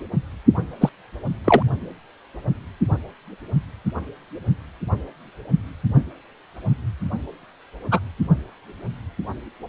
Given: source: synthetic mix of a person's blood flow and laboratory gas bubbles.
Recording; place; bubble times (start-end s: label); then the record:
Doppler ultrasound of blood flow; precordium
0.80-0.89 s: bubbles
1.44-1.62 s: bubbles
7.91-8.00 s: bubbles
From the record:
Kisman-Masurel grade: 123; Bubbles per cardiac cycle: 1 to 2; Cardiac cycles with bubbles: 10 to 50%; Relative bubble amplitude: loud (0.450 to 0.775); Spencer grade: 2 (many but less than half of the cardiac periods contain bubble signals, singularly or in groups); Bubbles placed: only in the low amplitude regions of the cardiac cycle